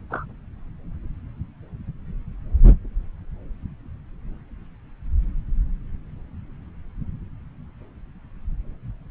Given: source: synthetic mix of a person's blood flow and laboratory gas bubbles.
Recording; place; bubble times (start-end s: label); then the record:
Doppler ultrasound of blood flow; subclavian vein
0.10-0.24 s: bubbles
From the record:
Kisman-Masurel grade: 111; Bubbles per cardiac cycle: 1 to 2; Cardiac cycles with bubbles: 1 to 10%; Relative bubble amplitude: barely perceptible (0.100 to 0.250); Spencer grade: 1 (occasional bubble signal discernible with the cardiac motion signal, with majority of cardiac periods free of bubbles); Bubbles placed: anywhere in the cardiac cycle